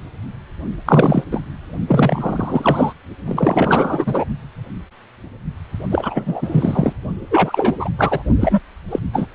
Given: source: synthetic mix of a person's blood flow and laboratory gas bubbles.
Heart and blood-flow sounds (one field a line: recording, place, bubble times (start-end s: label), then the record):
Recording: Doppler ultrasound of blood flow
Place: precordium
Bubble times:
0.85-1.24 s: bubbles
1.31-1.41 s: bubbles
1.87-2.93 s: bubbles
3.28-4.25 s: bubbles
5.90-6.93 s: bubbles
7.30-7.75 s: bubbles
7.79-7.90 s: bubbles
7.98-8.23 s: bubbles
8.40-8.59 s: bubbles
8.90-8.99 s: bubbles
9.13-9.26 s: bubbles
From the record:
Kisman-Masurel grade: 333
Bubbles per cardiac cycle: rolling drumbeat, 9 or more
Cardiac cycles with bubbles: 50 to 99%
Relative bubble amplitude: loud (0.450 to 0.775)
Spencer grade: 3 (all of the cardiac periods contain showers or single bubble signals, but not dominating or overriding the cardiac motion signals)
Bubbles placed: only in the low amplitude regions of the cardiac cycle